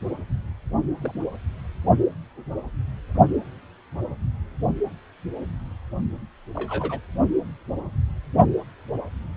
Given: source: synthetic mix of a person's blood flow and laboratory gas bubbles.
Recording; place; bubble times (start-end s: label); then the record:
Doppler ultrasound of blood flow; precordium
1.01-1.20 s: bubbles
6.54-7.00 s: bubbles
From the record:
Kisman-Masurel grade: 121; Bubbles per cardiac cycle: 1 to 2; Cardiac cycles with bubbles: 10 to 50%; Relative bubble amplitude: barely perceptible (0.100 to 0.250); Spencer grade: 2 (many but less than half of the cardiac periods contain bubble signals, singularly or in groups); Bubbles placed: only in the low amplitude regions of the cardiac cycle